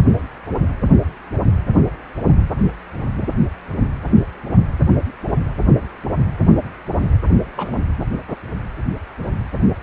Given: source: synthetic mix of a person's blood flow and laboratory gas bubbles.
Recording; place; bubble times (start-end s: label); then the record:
Doppler ultrasound of blood flow; precordium
7.55-7.80 s: bubbles
From the record:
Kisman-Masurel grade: 111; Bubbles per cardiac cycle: 1 to 2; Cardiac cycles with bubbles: 1 to 10%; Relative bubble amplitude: barely perceptible (0.100 to 0.250); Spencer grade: 1 (occasional bubble signal discernible with the cardiac motion signal, with majority of cardiac periods free of bubbles); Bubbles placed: anywhere in the cardiac cycle